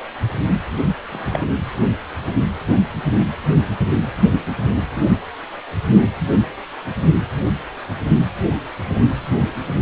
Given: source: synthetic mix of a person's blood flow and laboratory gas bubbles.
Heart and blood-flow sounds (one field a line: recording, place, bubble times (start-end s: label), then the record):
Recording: Doppler ultrasound of blood flow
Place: precordium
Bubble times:
1.12-1.45 s: bubbles
From the record:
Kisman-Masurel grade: 112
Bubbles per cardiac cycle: 1 to 2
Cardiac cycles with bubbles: 1 to 10%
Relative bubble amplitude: moderate (0.250 to 0.450)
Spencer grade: 1 (occasional bubble signal discernible with the cardiac motion signal, with majority of cardiac periods free of bubbles)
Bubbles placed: anywhere in the cardiac cycle